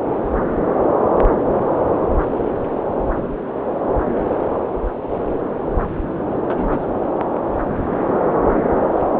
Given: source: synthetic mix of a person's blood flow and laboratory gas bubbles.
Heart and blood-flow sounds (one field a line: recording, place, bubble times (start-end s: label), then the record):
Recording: Doppler ultrasound of blood flow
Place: subclavian vein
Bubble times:
6.47-6.86 s: bubbles
From the record:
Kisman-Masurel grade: 112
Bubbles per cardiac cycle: 1 to 2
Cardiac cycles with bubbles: 1 to 10%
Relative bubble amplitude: moderate (0.250 to 0.450)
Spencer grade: 1 (occasional bubble signal discernible with the cardiac motion signal, with majority of cardiac periods free of bubbles)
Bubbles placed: anywhere in the cardiac cycle